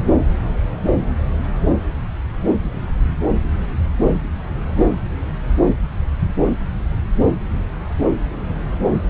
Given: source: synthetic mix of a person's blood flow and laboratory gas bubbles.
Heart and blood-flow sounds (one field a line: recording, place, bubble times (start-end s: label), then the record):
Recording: Doppler ultrasound of blood flow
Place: subclavian vein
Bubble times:
no bubbles
From the record:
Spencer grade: 0 (complete lack of bubble signals)